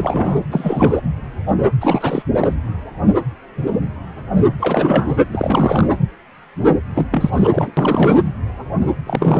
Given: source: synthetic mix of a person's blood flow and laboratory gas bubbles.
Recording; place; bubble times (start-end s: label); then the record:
Doppler ultrasound of blood flow; precordium
0.00-0.38 s: bubbles
0.51-1.01 s: bubbles
1.81-2.23 s: bubbles
2.39-2.55 s: bubbles
4.59-5.17 s: bubbles
5.31-5.89 s: bubbles
6.94-7.06 s: bubbles
7.11-7.30 s: bubbles
7.35-7.71 s: bubbles
7.77-8.22 s: bubbles
9.06-9.40 s: bubbles
From the record:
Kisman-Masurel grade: 333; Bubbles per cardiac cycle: rolling drumbeat, 9 or more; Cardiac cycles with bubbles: 50 to 99%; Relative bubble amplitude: loud (0.450 to 0.775); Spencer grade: 3 (all of the cardiac periods contain showers or single bubble signals, but not dominating or overriding the cardiac motion signals); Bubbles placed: anywhere in the cardiac cycle